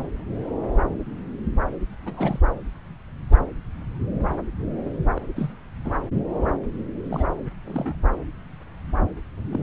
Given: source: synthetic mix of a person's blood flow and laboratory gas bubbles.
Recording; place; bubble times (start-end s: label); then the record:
Doppler ultrasound of blood flow; subclavian vein
2.06-2.40 s: bubbles
5.15-5.21 s: bubbles
5.34-5.54 s: bubbles
5.84-5.91 s: bubbles
7.11-7.29 s: bubbles
7.65-7.95 s: bubbles
9.52-9.63 s: bubbles
From the record:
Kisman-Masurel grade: 221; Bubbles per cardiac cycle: several, 3 to 8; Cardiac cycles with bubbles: 10 to 50%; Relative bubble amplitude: barely perceptible (0.100 to 0.250); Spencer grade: 2 (many but less than half of the cardiac periods contain bubble signals, singularly or in groups); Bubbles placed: anywhere in the cardiac cycle